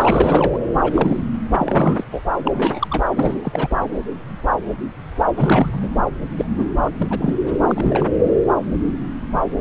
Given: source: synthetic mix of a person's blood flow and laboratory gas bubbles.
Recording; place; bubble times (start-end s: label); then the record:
Doppler ultrasound of blood flow; subclavian vein
0.00-0.59 s: bubbles
0.70-1.29 s: bubbles
1.56-2.04 s: bubbles
2.12-2.23 s: bubbles
2.45-2.88 s: bubbles
2.91-3.04 s: bubbles
3.15-3.38 s: bubbles
3.42-3.68 s: bubbles
3.70-3.77 s: bubbles
5.36-5.89 s: bubbles
6.36-6.45 s: bubbles
6.58-6.67 s: bubbles
6.84-6.90 s: bubbles
6.97-7.38 s: bubbles
7.46-7.58 s: bubbles
7.67-8.07 s: bubbles
From the record:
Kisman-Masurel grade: 332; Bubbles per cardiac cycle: rolling drumbeat, 9 or more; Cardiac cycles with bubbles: 50 to 99%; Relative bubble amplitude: moderate (0.250 to 0.450); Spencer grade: 3 (all of the cardiac periods contain showers or single bubble signals, but not dominating or overriding the cardiac motion signals); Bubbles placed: anywhere in the cardiac cycle